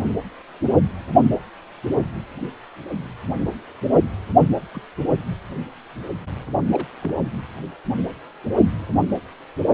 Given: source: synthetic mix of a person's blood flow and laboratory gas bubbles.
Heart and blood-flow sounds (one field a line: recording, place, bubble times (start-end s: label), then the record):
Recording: Doppler ultrasound of blood flow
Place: precordium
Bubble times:
4.74-4.83 s: bubbles
6.73-6.87 s: bubbles
7.01-7.17 s: bubbles
From the record:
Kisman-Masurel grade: 121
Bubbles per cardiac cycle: 1 to 2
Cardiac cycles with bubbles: 10 to 50%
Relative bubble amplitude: barely perceptible (0.100 to 0.250)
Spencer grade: 2 (many but less than half of the cardiac periods contain bubble signals, singularly or in groups)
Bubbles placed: anywhere in the cardiac cycle